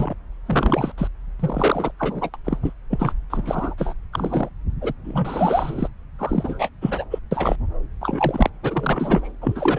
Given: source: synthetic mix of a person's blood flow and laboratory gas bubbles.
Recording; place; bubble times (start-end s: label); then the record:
Doppler ultrasound of blood flow; subclavian vein
0.00-0.15 s: bubbles
0.46-0.92 s: bubbles
0.97-1.07 s: bubbles
1.40-1.92 s: bubbles
1.99-2.30 s: bubbles
2.33-2.37 s: bubbles
2.45-2.58 s: bubbles
2.63-2.73 s: bubbles
2.90-3.13 s: bubbles
3.30-3.74 s: bubbles
3.78-3.94 s: bubbles
4.13-4.49 s: bubbles
4.81-4.93 s: bubbles
5.04-5.88 s: bubbles
6.19-6.69 s: bubbles
6.81-7.04 s: bubbles
7.11-7.19 s: bubbles
7.31-7.56 s: bubbles
8.00-8.50 s: bubbles
8.63-9.29 s: bubbles
9.41-9.79 s: bubbles
From the record:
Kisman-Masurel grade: 242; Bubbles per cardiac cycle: several, 3 to 8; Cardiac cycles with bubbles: 100%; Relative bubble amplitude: moderate (0.250 to 0.450); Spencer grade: 3 (all of the cardiac periods contain showers or single bubble signals, but not dominating or overriding the cardiac motion signals); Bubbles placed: anywhere in the cardiac cycle